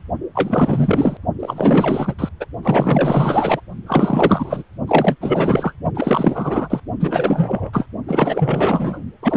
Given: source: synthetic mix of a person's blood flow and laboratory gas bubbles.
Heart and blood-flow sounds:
Doppler ultrasound of blood flow; precordium
0.35-1.17 s: bubbles
1.40-2.15 s: bubbles
2.19-2.29 s: bubbles
2.40-2.45 s: bubbles
2.62-3.60 s: bubbles
3.86-4.63 s: bubbles
4.88-5.16 s: bubbles
5.20-5.74 s: bubbles
5.95-6.80 s: bubbles
7.00-7.70 s: bubbles
7.73-7.86 s: bubbles
8.08-9.01 s: bubbles
9.22-9.37 s: bubbles
From the record:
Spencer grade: 4 (maximum detectable bubble signal sounding continuously throughout systole and diastole of every cardiac period, and overriding the amplitude of the normal cardiac signals); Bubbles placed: only in the low amplitude regions of the cardiac cycle

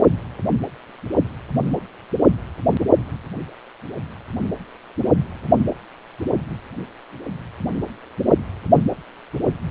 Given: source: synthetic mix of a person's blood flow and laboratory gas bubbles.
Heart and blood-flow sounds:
Doppler ultrasound of blood flow; precordium
no bubbles
From the record:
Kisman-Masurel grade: 000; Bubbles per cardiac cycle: 0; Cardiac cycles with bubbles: 0%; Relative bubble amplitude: no bubbles discernible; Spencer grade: 0 (complete lack of bubble signals)

